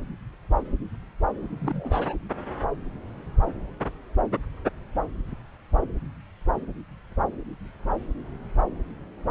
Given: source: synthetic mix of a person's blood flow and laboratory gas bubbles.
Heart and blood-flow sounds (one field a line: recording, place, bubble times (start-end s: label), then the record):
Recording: Doppler ultrasound of blood flow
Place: subclavian vein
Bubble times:
1.60-2.15 s: bubbles
From the record:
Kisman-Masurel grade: 211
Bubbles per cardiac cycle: several, 3 to 8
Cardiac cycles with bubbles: 1 to 10%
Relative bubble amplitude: barely perceptible (0.100 to 0.250)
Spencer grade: 1 (occasional bubble signal discernible with the cardiac motion signal, with majority of cardiac periods free of bubbles)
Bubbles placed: anywhere in the cardiac cycle